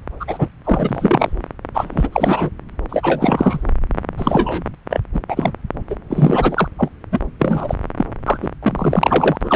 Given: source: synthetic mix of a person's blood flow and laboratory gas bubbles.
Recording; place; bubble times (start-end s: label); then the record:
Doppler ultrasound of blood flow; subclavian vein
0.20-0.25 s: bubbles
0.28-0.48 s: bubbles
0.64-1.42 s: bubbles
1.74-2.09 s: bubbles
2.12-2.50 s: bubbles
2.89-3.70 s: bubbles
4.17-4.63 s: bubbles
4.90-5.00 s: bubbles
5.13-5.20 s: bubbles
5.29-5.52 s: bubbles
5.90-5.96 s: bubbles
6.09-6.68 s: bubbles
6.78-6.90 s: bubbles
7.12-7.20 s: bubbles
7.39-7.74 s: bubbles
7.97-8.05 s: bubbles
8.25-8.38 s: bubbles
8.42-8.48 s: bubbles
8.62-9.36 s: bubbles
9.40-9.56 s: bubbles
From the record:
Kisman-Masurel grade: 343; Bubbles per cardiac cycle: rolling drumbeat, 9 or more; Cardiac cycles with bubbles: 100%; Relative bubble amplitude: loud (0.450 to 0.775); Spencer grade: 3 (all of the cardiac periods contain showers or single bubble signals, but not dominating or overriding the cardiac motion signals); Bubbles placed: anywhere in the cardiac cycle